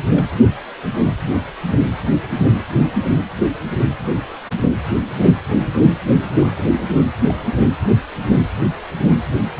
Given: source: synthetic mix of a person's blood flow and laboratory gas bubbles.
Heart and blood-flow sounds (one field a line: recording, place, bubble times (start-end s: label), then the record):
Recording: Doppler ultrasound of blood flow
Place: precordium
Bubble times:
0.12-0.25 s: bubbles
0.36-0.53 s: bubbles
1.66-1.75 s: bubbles
2.99-3.23 s: bubbles
6.35-6.68 s: bubbles
7.26-7.33 s: bubbles
From the record:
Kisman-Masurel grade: 121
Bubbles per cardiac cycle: 1 to 2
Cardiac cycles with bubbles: 10 to 50%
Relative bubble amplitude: barely perceptible (0.100 to 0.250)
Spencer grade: 2 (many but less than half of the cardiac periods contain bubble signals, singularly or in groups)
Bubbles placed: anywhere in the cardiac cycle